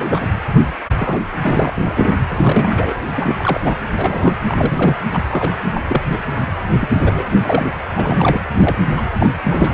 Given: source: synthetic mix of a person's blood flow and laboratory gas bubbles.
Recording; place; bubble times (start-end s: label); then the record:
Doppler ultrasound of blood flow; precordium
0.00-0.21 s: bubbles
0.53-0.64 s: bubbles
0.96-1.23 s: bubbles
1.42-2.12 s: bubbles
2.29-2.94 s: bubbles
3.07-3.60 s: bubbles
3.63-3.76 s: bubbles
3.98-4.36 s: bubbles
4.46-5.01 s: bubbles
5.12-5.58 s: bubbles
5.74-5.82 s: bubbles
5.88-6.03 s: bubbles
6.11-6.19 s: bubbles
6.81-6.89 s: bubbles
7.00-7.29 s: bubbles
7.32-7.77 s: bubbles
7.97-8.40 s: bubbles
8.54-8.76 s: bubbles
8.96-9.01 s: bubbles
9.18-9.31 s: bubbles
9.43-9.74 s: bubbles
From the record:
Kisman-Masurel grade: 242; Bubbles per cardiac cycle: several, 3 to 8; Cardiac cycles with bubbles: 100%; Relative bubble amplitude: moderate (0.250 to 0.450); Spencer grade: 3 (all of the cardiac periods contain showers or single bubble signals, but not dominating or overriding the cardiac motion signals); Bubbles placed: anywhere in the cardiac cycle